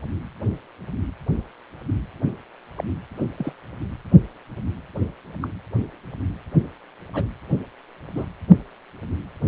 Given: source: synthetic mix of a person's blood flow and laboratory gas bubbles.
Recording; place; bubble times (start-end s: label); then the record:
Doppler ultrasound of blood flow; precordium
2.76-2.84 s: bubbles
3.38-3.52 s: bubbles
5.42-5.48 s: bubbles
7.13-7.26 s: bubbles
8.15-8.26 s: bubbles
From the record:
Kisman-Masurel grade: 121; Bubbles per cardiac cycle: 1 to 2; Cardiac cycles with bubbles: 10 to 50%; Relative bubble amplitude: barely perceptible (0.100 to 0.250); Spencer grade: 2 (many but less than half of the cardiac periods contain bubble signals, singularly or in groups); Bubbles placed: anywhere in the cardiac cycle